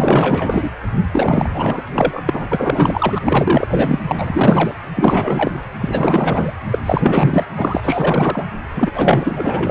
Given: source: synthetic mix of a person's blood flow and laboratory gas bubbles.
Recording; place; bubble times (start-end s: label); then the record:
Doppler ultrasound of blood flow; precordium
0.00-0.70 s: bubbles
1.12-1.49 s: bubbles
1.53-1.82 s: bubbles
1.92-2.23 s: bubbles
2.26-3.19 s: bubbles
3.25-3.67 s: bubbles
3.71-3.99 s: bubbles
4.08-4.75 s: bubbles
4.96-5.53 s: bubbles
5.80-6.54 s: bubbles
6.71-6.79 s: bubbles
6.86-7.46 s: bubbles
7.57-8.44 s: bubbles
8.76-8.91 s: bubbles
8.94-9.71 s: bubbles
From the record:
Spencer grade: 4 (maximum detectable bubble signal sounding continuously throughout systole and diastole of every cardiac period, and overriding the amplitude of the normal cardiac signals); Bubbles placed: anywhere in the cardiac cycle